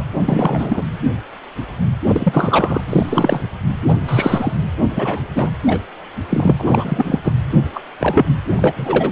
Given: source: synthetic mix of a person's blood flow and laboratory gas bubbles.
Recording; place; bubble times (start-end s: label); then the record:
Doppler ultrasound of blood flow; precordium
0.00-0.03 s: bubbles
0.13-0.83 s: bubbles
2.08-2.81 s: bubbles
2.87-3.48 s: bubbles
3.88-3.94 s: bubbles
4.07-4.52 s: bubbles
4.84-5.19 s: bubbles
5.34-5.50 s: bubbles
5.65-5.80 s: bubbles
6.29-6.53 s: bubbles
6.57-7.19 s: bubbles
7.24-7.33 s: bubbles
7.75-7.80 s: bubbles
8.00-8.25 s: bubbles
8.47-8.54 s: bubbles
8.58-9.12 s: bubbles
From the record:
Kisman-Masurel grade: 233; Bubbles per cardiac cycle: several, 3 to 8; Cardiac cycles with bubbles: 50 to 99%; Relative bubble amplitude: loud (0.450 to 0.775); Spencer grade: 3 (all of the cardiac periods contain showers or single bubble signals, but not dominating or overriding the cardiac motion signals); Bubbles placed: anywhere in the cardiac cycle